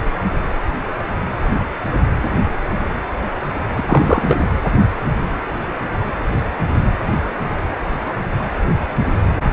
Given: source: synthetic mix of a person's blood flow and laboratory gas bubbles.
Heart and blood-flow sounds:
Doppler ultrasound of blood flow; precordium
3.75-3.84 s: bubbles
3.88-4.37 s: bubbles
From the record:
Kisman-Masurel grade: 213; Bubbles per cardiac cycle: several, 3 to 8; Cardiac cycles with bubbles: 1 to 10%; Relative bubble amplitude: loud (0.450 to 0.775); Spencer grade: 1 (occasional bubble signal discernible with the cardiac motion signal, with majority of cardiac periods free of bubbles); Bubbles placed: anywhere in the cardiac cycle

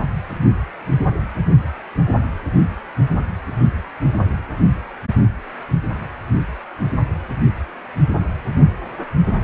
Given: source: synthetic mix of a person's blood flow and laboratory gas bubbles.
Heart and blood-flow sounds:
Doppler ultrasound of blood flow; precordium
no bubbles
From the record:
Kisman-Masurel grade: 000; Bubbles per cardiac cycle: 0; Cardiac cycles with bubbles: 0%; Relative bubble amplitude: no bubbles discernible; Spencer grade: 0 (complete lack of bubble signals)

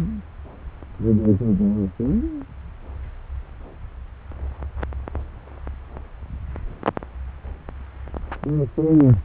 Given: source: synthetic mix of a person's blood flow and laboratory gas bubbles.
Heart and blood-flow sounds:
Doppler ultrasound of blood flow; subclavian vein
0.00-0.03 s: bubbles
From the record:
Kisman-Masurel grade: 212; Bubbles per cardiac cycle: several, 3 to 8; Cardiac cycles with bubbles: 1 to 10%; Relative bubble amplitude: moderate (0.250 to 0.450); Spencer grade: 1 (occasional bubble signal discernible with the cardiac motion signal, with majority of cardiac periods free of bubbles); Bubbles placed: anywhere in the cardiac cycle

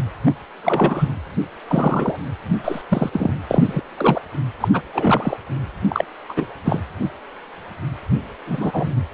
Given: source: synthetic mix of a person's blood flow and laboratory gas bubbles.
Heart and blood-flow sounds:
Doppler ultrasound of blood flow; precordium
0.26-0.33 s: bubbles
0.61-1.09 s: bubbles
1.68-2.17 s: bubbles
2.64-2.81 s: bubbles
2.90-3.09 s: bubbles
3.13-3.38 s: bubbles
3.50-3.81 s: bubbles
3.98-4.20 s: bubbles
4.60-4.68 s: bubbles
4.73-4.81 s: bubbles
4.92-5.37 s: bubbles
5.88-6.04 s: bubbles
6.29-6.46 s: bubbles
6.64-6.80 s: bubbles
8.46-8.92 s: bubbles
From the record:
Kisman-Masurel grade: 232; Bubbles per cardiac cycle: several, 3 to 8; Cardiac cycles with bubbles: 50 to 99%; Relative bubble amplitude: moderate (0.250 to 0.450); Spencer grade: 3 (all of the cardiac periods contain showers or single bubble signals, but not dominating or overriding the cardiac motion signals); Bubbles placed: anywhere in the cardiac cycle

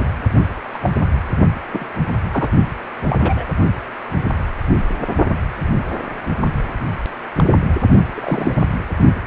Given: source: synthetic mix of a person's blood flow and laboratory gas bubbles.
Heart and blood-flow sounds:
Doppler ultrasound of blood flow; precordium
0.00-0.05 s: bubbles
0.73-0.78 s: bubbles
0.80-0.91 s: bubbles
1.72-1.86 s: bubbles
2.31-2.50 s: bubbles
3.07-3.45 s: bubbles
7.36-7.44 s: bubbles
8.14-8.63 s: bubbles
From the record:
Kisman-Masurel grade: 122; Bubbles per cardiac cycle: 1 to 2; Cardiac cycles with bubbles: 10 to 50%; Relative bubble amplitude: moderate (0.250 to 0.450); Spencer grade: 2 (many but less than half of the cardiac periods contain bubble signals, singularly or in groups); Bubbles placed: only in the low amplitude regions of the cardiac cycle

